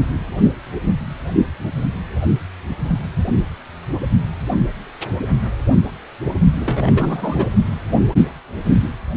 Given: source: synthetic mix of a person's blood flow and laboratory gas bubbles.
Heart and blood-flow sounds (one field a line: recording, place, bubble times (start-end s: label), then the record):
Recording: Doppler ultrasound of blood flow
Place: precordium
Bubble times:
6.60-7.47 s: bubbles
From the record:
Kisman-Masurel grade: 212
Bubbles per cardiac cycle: several, 3 to 8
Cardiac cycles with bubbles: 1 to 10%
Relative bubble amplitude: moderate (0.250 to 0.450)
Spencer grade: 1 (occasional bubble signal discernible with the cardiac motion signal, with majority of cardiac periods free of bubbles)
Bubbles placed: only in the low amplitude regions of the cardiac cycle